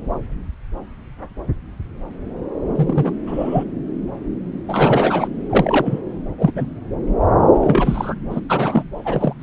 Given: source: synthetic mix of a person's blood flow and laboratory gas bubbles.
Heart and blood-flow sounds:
Doppler ultrasound of blood flow; subclavian vein
2.75-3.12 s: bubbles
3.26-3.64 s: bubbles
4.68-5.27 s: bubbles
5.49-6.00 s: bubbles
6.38-6.52 s: bubbles
6.54-6.65 s: bubbles
7.60-8.15 s: bubbles
8.30-8.41 s: bubbles
8.49-8.84 s: bubbles
9.04-9.34 s: bubbles
9.39-9.43 s: bubbles
From the record:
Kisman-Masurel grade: 232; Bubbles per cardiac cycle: several, 3 to 8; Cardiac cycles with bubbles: 50 to 99%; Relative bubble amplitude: moderate (0.250 to 0.450); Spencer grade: 3 (all of the cardiac periods contain showers or single bubble signals, but not dominating or overriding the cardiac motion signals); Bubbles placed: anywhere in the cardiac cycle

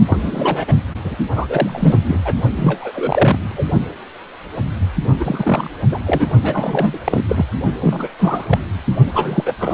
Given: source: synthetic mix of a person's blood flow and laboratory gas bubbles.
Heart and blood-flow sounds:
Doppler ultrasound of blood flow; precordium
0.06-0.65 s: bubbles
0.67-0.74 s: bubbles
1.04-1.16 s: bubbles
1.32-2.21 s: bubbles
2.24-2.33 s: bubbles
2.55-2.92 s: bubbles
2.95-3.65 s: bubbles
5.19-5.71 s: bubbles
5.91-6.00 s: bubbles
6.06-6.27 s: bubbles
6.42-6.98 s: bubbles
7.04-7.25 s: bubbles
7.29-7.46 s: bubbles
7.80-8.09 s: bubbles
8.18-8.58 s: bubbles
9.14-9.54 s: bubbles
9.60-9.73 s: bubbles
From the record:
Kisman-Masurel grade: 332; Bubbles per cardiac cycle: rolling drumbeat, 9 or more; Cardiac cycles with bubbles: 50 to 99%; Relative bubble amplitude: moderate (0.250 to 0.450); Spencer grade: 3 (all of the cardiac periods contain showers or single bubble signals, but not dominating or overriding the cardiac motion signals); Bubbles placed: only in the low amplitude regions of the cardiac cycle

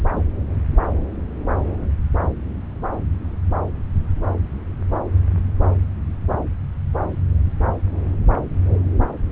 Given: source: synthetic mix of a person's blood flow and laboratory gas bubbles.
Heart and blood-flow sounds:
Doppler ultrasound of blood flow; subclavian vein
0.13-0.23 s: bubbles
From the record:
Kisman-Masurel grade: 111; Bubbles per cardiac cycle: 1 to 2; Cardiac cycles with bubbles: 1 to 10%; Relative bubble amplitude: barely perceptible (0.100 to 0.250); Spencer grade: 1 (occasional bubble signal discernible with the cardiac motion signal, with majority of cardiac periods free of bubbles); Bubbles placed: anywhere in the cardiac cycle

